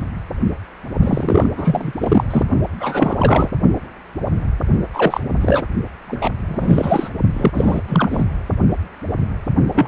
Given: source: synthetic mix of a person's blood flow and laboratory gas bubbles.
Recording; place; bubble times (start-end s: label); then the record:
Doppler ultrasound of blood flow; precordium
1.00-1.49 s: bubbles
1.57-1.92 s: bubbles
1.98-2.24 s: bubbles
2.30-2.44 s: bubbles
2.79-3.50 s: bubbles
4.93-5.21 s: bubbles
5.41-5.65 s: bubbles
6.07-6.30 s: bubbles
6.40-7.09 s: bubbles
7.34-7.51 s: bubbles
7.54-7.81 s: bubbles
7.87-8.25 s: bubbles
9.73-9.88 s: bubbles
From the record:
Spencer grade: 3 (all of the cardiac periods contain showers or single bubble signals, but not dominating or overriding the cardiac motion signals); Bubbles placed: only in the low amplitude regions of the cardiac cycle